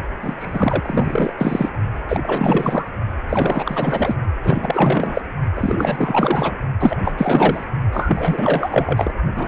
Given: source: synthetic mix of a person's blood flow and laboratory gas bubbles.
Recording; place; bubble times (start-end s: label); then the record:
Doppler ultrasound of blood flow; precordium
0.22-0.35 s: bubbles
0.37-1.33 s: bubbles
1.38-1.69 s: bubbles
2.09-2.89 s: bubbles
3.29-4.17 s: bubbles
4.42-5.21 s: bubbles
5.55-6.58 s: bubbles
6.80-6.97 s: bubbles
7.01-7.64 s: bubbles
7.92-9.14 s: bubbles
9.35-9.48 s: bubbles
From the record:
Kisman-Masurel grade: 444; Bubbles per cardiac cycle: continuous sound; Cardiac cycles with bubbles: 100%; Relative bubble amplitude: maximal (0.775 to 0.999); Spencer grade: 4 (maximum detectable bubble signal sounding continuously throughout systole and diastole of every cardiac period, and overriding the amplitude of the normal cardiac signals); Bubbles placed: only in the low amplitude regions of the cardiac cycle